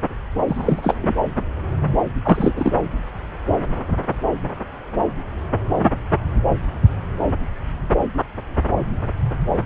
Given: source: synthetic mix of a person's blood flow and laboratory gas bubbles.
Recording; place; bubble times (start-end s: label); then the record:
Doppler ultrasound of blood flow; subclavian vein
0.47-0.95 s: bubbles
1.01-1.15 s: bubbles
2.24-2.73 s: bubbles
From the record:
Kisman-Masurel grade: 223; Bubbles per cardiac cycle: several, 3 to 8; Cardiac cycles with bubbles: 10 to 50%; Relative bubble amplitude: loud (0.450 to 0.775); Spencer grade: 2 (many but less than half of the cardiac periods contain bubble signals, singularly or in groups); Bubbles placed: anywhere in the cardiac cycle